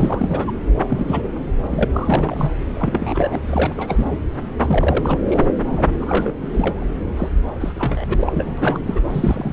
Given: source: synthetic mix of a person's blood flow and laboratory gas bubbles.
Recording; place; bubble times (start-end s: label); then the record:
Doppler ultrasound of blood flow; subclavian vein
0.00-0.52 s: bubbles
0.90-1.22 s: bubbles
1.70-1.85 s: bubbles
1.92-2.52 s: bubbles
2.75-3.38 s: bubbles
3.46-3.73 s: bubbles
3.77-4.18 s: bubbles
4.59-5.19 s: bubbles
5.28-5.46 s: bubbles
5.71-5.88 s: bubbles
6.00-6.34 s: bubbles
6.42-6.46 s: bubbles
6.54-6.86 s: bubbles
7.17-7.29 s: bubbles
7.60-8.79 s: bubbles
8.87-9.02 s: bubbles
9.10-9.53 s: bubbles
From the record:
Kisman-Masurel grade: 332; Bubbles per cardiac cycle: rolling drumbeat, 9 or more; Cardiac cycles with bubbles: 50 to 99%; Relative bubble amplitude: moderate (0.250 to 0.450); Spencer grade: 3 (all of the cardiac periods contain showers or single bubble signals, but not dominating or overriding the cardiac motion signals); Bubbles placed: anywhere in the cardiac cycle